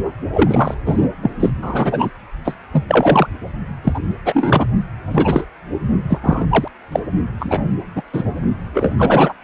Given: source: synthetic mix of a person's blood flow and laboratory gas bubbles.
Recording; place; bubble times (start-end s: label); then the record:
Doppler ultrasound of blood flow; precordium
0.34-0.75 s: bubbles
0.85-0.98 s: bubbles
1.22-1.31 s: bubbles
1.40-1.51 s: bubbles
1.62-2.10 s: bubbles
2.45-2.56 s: bubbles
2.72-2.85 s: bubbles
2.88-3.27 s: bubbles
3.83-4.00 s: bubbles
4.25-4.66 s: bubbles
5.11-5.45 s: bubbles
6.09-6.19 s: bubbles
6.23-6.46 s: bubbles
6.50-6.68 s: bubbles
6.92-7.00 s: bubbles
7.39-7.61 s: bubbles
7.95-8.02 s: bubbles
8.13-8.22 s: bubbles
8.74-8.93 s: bubbles
8.97-9.34 s: bubbles
From the record:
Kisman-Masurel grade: 233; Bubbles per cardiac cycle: several, 3 to 8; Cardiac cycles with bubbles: 50 to 99%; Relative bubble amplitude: loud (0.450 to 0.775); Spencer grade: 3 (all of the cardiac periods contain showers or single bubble signals, but not dominating or overriding the cardiac motion signals); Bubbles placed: only in the low amplitude regions of the cardiac cycle